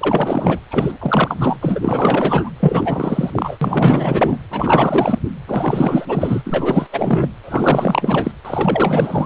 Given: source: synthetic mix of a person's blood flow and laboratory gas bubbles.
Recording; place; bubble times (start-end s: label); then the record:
Doppler ultrasound of blood flow; precordium
0.01-0.60 s: bubbles
0.71-1.56 s: bubbles
1.60-2.50 s: bubbles
2.60-3.58 s: bubbles
3.61-4.39 s: bubbles
4.50-5.18 s: bubbles
5.47-6.42 s: bubbles
6.45-6.87 s: bubbles
6.92-7.29 s: bubbles
7.43-8.31 s: bubbles
8.45-9.26 s: bubbles
From the record:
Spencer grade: 4 (maximum detectable bubble signal sounding continuously throughout systole and diastole of every cardiac period, and overriding the amplitude of the normal cardiac signals); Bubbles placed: anywhere in the cardiac cycle